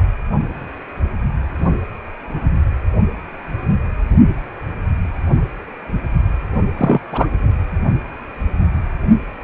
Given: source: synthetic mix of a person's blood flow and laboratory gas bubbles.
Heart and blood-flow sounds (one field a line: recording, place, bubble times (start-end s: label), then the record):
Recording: Doppler ultrasound of blood flow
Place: precordium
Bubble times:
6.77-7.01 s: bubbles
7.12-7.27 s: bubbles
From the record:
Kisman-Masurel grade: 213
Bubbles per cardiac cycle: several, 3 to 8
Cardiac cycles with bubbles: 1 to 10%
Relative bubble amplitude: loud (0.450 to 0.775)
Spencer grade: 1 (occasional bubble signal discernible with the cardiac motion signal, with majority of cardiac periods free of bubbles)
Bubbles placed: anywhere in the cardiac cycle